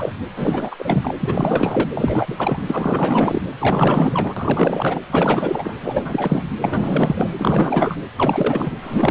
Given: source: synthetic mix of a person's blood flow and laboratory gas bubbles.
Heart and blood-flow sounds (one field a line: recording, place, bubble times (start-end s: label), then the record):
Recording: Doppler ultrasound of blood flow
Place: precordium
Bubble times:
0.00-0.14 s: bubbles
0.36-0.76 s: bubbles
0.78-1.15 s: bubbles
1.20-1.89 s: bubbles
1.94-2.62 s: bubbles
2.67-3.41 s: bubbles
3.58-5.00 s: bubbles
5.10-5.79 s: bubbles
5.81-6.44 s: bubbles
6.62-7.30 s: bubbles
7.38-7.96 s: bubbles
8.18-8.74 s: bubbles
8.81-9.11 s: bubbles
From the record:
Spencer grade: 4 (maximum detectable bubble signal sounding continuously throughout systole and diastole of every cardiac period, and overriding the amplitude of the normal cardiac signals)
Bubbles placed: anywhere in the cardiac cycle